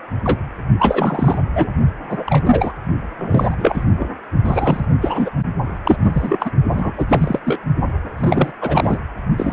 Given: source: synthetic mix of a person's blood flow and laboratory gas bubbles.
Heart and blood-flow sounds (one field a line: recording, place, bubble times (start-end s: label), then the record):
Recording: Doppler ultrasound of blood flow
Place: precordium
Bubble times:
0.24-0.40 s: bubbles
0.79-1.38 s: bubbles
1.55-1.70 s: bubbles
2.09-2.73 s: bubbles
3.18-3.85 s: bubbles
3.99-4.10 s: bubbles
4.44-4.85 s: bubbles
5.00-5.30 s: bubbles
5.84-5.97 s: bubbles
6.02-6.50 s: bubbles
6.71-6.93 s: bubbles
6.97-7.06 s: bubbles
7.09-7.39 s: bubbles
7.45-7.59 s: bubbles
8.16-8.52 s: bubbles
8.61-8.98 s: bubbles
9.37-9.53 s: bubbles
From the record:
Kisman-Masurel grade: 343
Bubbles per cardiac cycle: rolling drumbeat, 9 or more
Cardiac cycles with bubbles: 100%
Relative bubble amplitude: loud (0.450 to 0.775)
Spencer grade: 3 (all of the cardiac periods contain showers or single bubble signals, but not dominating or overriding the cardiac motion signals)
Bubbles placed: only in the low amplitude regions of the cardiac cycle